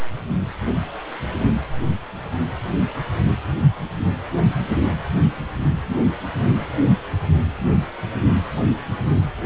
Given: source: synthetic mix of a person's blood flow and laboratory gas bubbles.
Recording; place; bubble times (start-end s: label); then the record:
Doppler ultrasound of blood flow; precordium
no bubbles
From the record:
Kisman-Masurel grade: 000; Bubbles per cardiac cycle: 0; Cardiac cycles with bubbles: 0%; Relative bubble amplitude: no bubbles discernible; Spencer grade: 0 (complete lack of bubble signals)